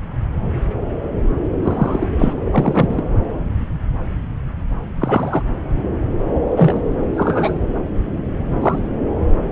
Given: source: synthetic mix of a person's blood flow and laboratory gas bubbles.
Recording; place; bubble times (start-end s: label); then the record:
Doppler ultrasound of blood flow; subclavian vein
1.62-2.09 s: bubbles
2.19-2.33 s: bubbles
2.51-3.03 s: bubbles
5.00-5.42 s: bubbles
6.56-6.81 s: bubbles
7.14-7.59 s: bubbles
8.62-8.79 s: bubbles
From the record:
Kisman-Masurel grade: 123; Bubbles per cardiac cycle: 1 to 2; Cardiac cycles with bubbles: 10 to 50%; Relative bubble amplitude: loud (0.450 to 0.775); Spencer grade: 2 (many but less than half of the cardiac periods contain bubble signals, singularly or in groups); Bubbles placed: anywhere in the cardiac cycle